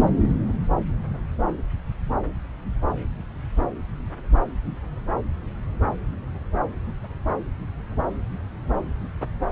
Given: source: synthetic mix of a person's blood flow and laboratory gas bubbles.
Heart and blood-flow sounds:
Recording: Doppler ultrasound of blood flow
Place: subclavian vein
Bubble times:
no bubbles
From the record:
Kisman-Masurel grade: 000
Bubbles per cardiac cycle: 0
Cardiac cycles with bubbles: 0%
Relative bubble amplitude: no bubbles discernible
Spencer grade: 0 (complete lack of bubble signals)

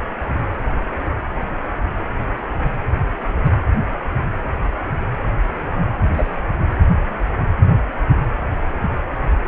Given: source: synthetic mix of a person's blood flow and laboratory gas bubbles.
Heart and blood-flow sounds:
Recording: Doppler ultrasound of blood flow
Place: precordium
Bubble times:
6.12-6.36 s: bubbles
From the record:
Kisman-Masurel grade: 122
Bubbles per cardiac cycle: 1 to 2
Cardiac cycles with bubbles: 10 to 50%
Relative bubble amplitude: moderate (0.250 to 0.450)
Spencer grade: 2 (many but less than half of the cardiac periods contain bubble signals, singularly or in groups)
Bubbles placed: anywhere in the cardiac cycle

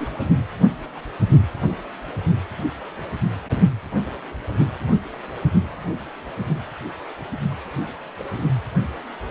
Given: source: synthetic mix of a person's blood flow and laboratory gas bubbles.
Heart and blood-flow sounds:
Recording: Doppler ultrasound of blood flow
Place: precordium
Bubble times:
0.00-0.07 s: bubbles
From the record:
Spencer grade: 2 (many but less than half of the cardiac periods contain bubble signals, singularly or in groups)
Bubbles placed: only in the low amplitude regions of the cardiac cycle

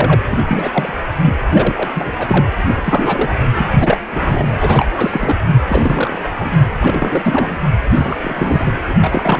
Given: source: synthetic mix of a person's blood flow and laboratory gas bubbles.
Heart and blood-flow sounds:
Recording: Doppler ultrasound of blood flow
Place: precordium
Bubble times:
0.00-0.22 s: bubbles
0.30-0.93 s: bubbles
1.24-1.34 s: bubbles
1.51-1.89 s: bubbles
1.95-2.11 s: bubbles
2.18-2.46 s: bubbles
2.68-3.30 s: bubbles
3.57-3.67 s: bubbles
3.79-3.98 s: bubbles
4.12-4.86 s: bubbles
4.96-5.38 s: bubbles
5.67-6.29 s: bubbles
6.39-6.52 s: bubbles
6.80-7.57 s: bubbles
7.94-8.17 s: bubbles
8.22-8.72 s: bubbles
8.88-8.94 s: bubbles
9.01-9.40 s: bubbles
From the record:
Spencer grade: 3 (all of the cardiac periods contain showers or single bubble signals, but not dominating or overriding the cardiac motion signals)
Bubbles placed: anywhere in the cardiac cycle

